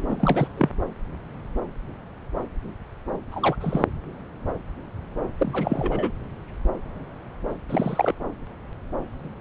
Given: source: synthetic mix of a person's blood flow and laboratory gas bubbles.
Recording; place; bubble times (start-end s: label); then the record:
Doppler ultrasound of blood flow; subclavian vein
0.00-0.47 s: bubbles
0.58-0.70 s: bubbles
3.31-3.56 s: bubbles
3.60-3.85 s: bubbles
5.38-6.12 s: bubbles
7.69-8.14 s: bubbles
From the record:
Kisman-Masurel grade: 222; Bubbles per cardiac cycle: several, 3 to 8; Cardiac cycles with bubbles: 10 to 50%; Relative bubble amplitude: moderate (0.250 to 0.450); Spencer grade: 2 (many but less than half of the cardiac periods contain bubble signals, singularly or in groups); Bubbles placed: anywhere in the cardiac cycle